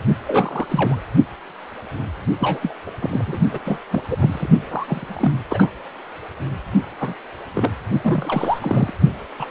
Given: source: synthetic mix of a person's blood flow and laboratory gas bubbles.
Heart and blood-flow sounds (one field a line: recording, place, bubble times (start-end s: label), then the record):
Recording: Doppler ultrasound of blood flow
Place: precordium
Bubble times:
0.27-0.96 s: bubbles
2.39-2.59 s: bubbles
2.62-2.74 s: bubbles
2.86-2.91 s: bubbles
3.01-3.37 s: bubbles
3.50-3.60 s: bubbles
3.64-3.79 s: bubbles
3.90-4.04 s: bubbles
4.08-4.47 s: bubbles
4.70-5.31 s: bubbles
5.50-5.71 s: bubbles
7.00-7.13 s: bubbles
7.54-7.70 s: bubbles
8.04-8.93 s: bubbles
9.39-9.46 s: bubbles
From the record:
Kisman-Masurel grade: 232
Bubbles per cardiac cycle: several, 3 to 8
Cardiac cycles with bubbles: 50 to 99%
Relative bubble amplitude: moderate (0.250 to 0.450)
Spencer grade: 3 (all of the cardiac periods contain showers or single bubble signals, but not dominating or overriding the cardiac motion signals)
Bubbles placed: only in the low amplitude regions of the cardiac cycle